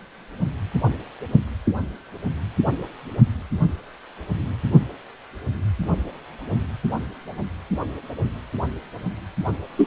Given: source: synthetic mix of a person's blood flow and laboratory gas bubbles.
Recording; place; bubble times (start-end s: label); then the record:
Doppler ultrasound of blood flow; precordium
9.77-9.87 s: bubbles
From the record:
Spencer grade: 2 (many but less than half of the cardiac periods contain bubble signals, singularly or in groups); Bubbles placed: anywhere in the cardiac cycle